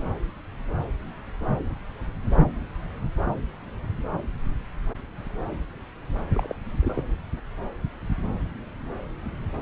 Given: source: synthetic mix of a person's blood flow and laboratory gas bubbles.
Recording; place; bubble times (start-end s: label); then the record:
Doppler ultrasound of blood flow; subclavian vein
6.33-6.55 s: bubbles
6.79-7.03 s: bubbles
From the record:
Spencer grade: 2 (many but less than half of the cardiac periods contain bubble signals, singularly or in groups); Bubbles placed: anywhere in the cardiac cycle